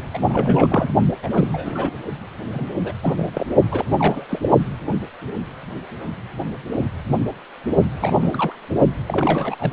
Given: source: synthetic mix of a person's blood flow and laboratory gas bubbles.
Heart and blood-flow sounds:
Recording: Doppler ultrasound of blood flow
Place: precordium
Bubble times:
0.13-0.18 s: bubbles
0.29-0.90 s: bubbles
1.23-1.29 s: bubbles
1.32-2.00 s: bubbles
2.53-2.93 s: bubbles
3.03-3.47 s: bubbles
3.71-3.86 s: bubbles
3.99-4.50 s: bubbles
8.00-8.53 s: bubbles
9.06-9.56 s: bubbles
9.59-9.73 s: bubbles
From the record:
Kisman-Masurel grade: 232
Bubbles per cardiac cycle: several, 3 to 8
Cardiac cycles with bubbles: 50 to 99%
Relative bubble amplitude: moderate (0.250 to 0.450)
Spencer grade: 3 (all of the cardiac periods contain showers or single bubble signals, but not dominating or overriding the cardiac motion signals)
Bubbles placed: only in the low amplitude regions of the cardiac cycle

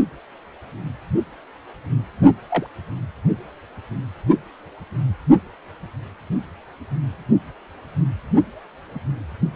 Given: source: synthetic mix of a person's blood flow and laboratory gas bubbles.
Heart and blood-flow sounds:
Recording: Doppler ultrasound of blood flow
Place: precordium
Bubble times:
2.50-2.67 s: bubbles
From the record:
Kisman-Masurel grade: 112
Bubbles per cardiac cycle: 1 to 2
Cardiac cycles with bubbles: 1 to 10%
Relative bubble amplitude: moderate (0.250 to 0.450)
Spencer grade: 1 (occasional bubble signal discernible with the cardiac motion signal, with majority of cardiac periods free of bubbles)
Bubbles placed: only in the low amplitude regions of the cardiac cycle

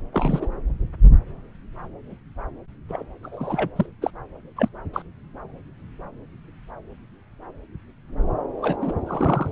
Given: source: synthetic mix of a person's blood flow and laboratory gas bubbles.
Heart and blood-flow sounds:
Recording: Doppler ultrasound of blood flow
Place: subclavian vein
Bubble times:
0.13-0.46 s: bubbles
2.88-3.02 s: bubbles
3.23-3.70 s: bubbles
3.76-3.86 s: bubbles
4.02-4.10 s: bubbles
4.56-4.68 s: bubbles
4.93-5.02 s: bubbles
8.62-8.77 s: bubbles
8.81-8.93 s: bubbles
9.06-9.51 s: bubbles
From the record:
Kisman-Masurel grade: 222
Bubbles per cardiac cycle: several, 3 to 8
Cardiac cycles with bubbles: 10 to 50%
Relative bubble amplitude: moderate (0.250 to 0.450)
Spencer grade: 2 (many but less than half of the cardiac periods contain bubble signals, singularly or in groups)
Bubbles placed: anywhere in the cardiac cycle

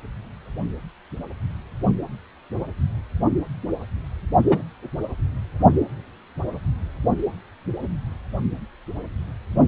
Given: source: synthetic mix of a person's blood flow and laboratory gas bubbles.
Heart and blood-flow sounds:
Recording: Doppler ultrasound of blood flow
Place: precordium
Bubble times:
4.50-4.62 s: bubbles
From the record:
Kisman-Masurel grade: 113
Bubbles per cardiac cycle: 1 to 2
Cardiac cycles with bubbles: 1 to 10%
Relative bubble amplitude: loud (0.450 to 0.775)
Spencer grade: 1 (occasional bubble signal discernible with the cardiac motion signal, with majority of cardiac periods free of bubbles)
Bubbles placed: only in the low amplitude regions of the cardiac cycle

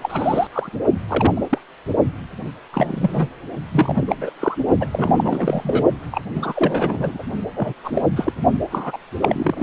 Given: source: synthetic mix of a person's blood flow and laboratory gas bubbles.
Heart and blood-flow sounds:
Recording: Doppler ultrasound of blood flow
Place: precordium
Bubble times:
0.02-0.47 s: bubbles
0.53-0.69 s: bubbles
1.07-1.47 s: bubbles
1.50-1.58 s: bubbles
2.73-3.28 s: bubbles
3.74-4.15 s: bubbles
4.21-4.30 s: bubbles
4.40-4.54 s: bubbles
4.80-4.88 s: bubbles
4.92-5.84 s: bubbles
6.11-6.21 s: bubbles
6.33-7.23 s: bubbles
7.56-7.73 s: bubbles
7.83-8.02 s: bubbles
8.16-8.33 s: bubbles
8.71-8.97 s: bubbles
9.21-9.63 s: bubbles
From the record:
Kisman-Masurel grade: 242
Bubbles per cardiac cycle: several, 3 to 8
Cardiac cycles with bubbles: 100%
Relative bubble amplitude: moderate (0.250 to 0.450)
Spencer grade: 3 (all of the cardiac periods contain showers or single bubble signals, but not dominating or overriding the cardiac motion signals)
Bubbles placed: only in the low amplitude regions of the cardiac cycle

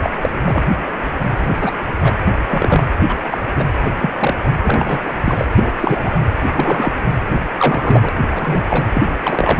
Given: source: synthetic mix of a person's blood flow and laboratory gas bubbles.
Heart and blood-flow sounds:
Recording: Doppler ultrasound of blood flow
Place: precordium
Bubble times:
0.01-0.10 s: bubbles
0.21-0.64 s: bubbles
1.38-1.73 s: bubbles
2.01-2.14 s: bubbles
2.38-2.41 s: bubbles
2.50-2.84 s: bubbles
3.08-3.17 s: bubbles
3.31-3.38 s: bubbles
3.56-3.70 s: bubbles
3.84-3.90 s: bubbles
3.99-4.12 s: bubbles
4.19-4.34 s: bubbles
4.62-5.02 s: bubbles
5.04-5.10 s: bubbles
5.24-5.45 s: bubbles
5.56-5.70 s: bubbles
5.80-6.13 s: bubbles
6.30-6.92 s: bubbles
7.58-8.09 s: bubbles
8.31-8.62 s: bubbles
8.69-8.87 s: bubbles
8.94-9.03 s: bubbles
9.23-9.59 s: bubbles
From the record:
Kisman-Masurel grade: 243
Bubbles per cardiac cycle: several, 3 to 8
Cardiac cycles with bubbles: 100%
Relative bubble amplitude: loud (0.450 to 0.775)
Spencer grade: 3 (all of the cardiac periods contain showers or single bubble signals, but not dominating or overriding the cardiac motion signals)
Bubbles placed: anywhere in the cardiac cycle

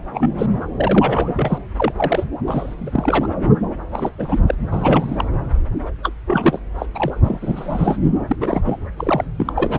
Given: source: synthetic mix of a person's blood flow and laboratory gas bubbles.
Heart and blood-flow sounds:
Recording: Doppler ultrasound of blood flow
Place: subclavian vein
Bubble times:
0.14-0.31 s: bubbles
0.38-0.47 s: bubbles
0.77-1.31 s: bubbles
1.35-1.58 s: bubbles
1.78-1.92 s: bubbles
1.96-2.26 s: bubbles
2.48-2.75 s: bubbles
2.77-3.29 s: bubbles
3.92-4.09 s: bubbles
4.18-4.40 s: bubbles
4.47-4.55 s: bubbles
4.71-5.24 s: bubbles
6.03-6.13 s: bubbles
6.28-6.59 s: bubbles
6.78-6.86 s: bubbles
6.95-7.97 s: bubbles
8.27-8.36 s: bubbles
8.40-8.61 s: bubbles
8.64-8.79 s: bubbles
8.96-9.24 s: bubbles
9.37-9.53 s: bubbles
9.55-9.78 s: bubbles
From the record:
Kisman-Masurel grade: 342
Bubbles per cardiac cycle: rolling drumbeat, 9 or more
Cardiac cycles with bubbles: 100%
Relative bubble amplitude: moderate (0.250 to 0.450)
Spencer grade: 3 (all of the cardiac periods contain showers or single bubble signals, but not dominating or overriding the cardiac motion signals)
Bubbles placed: anywhere in the cardiac cycle

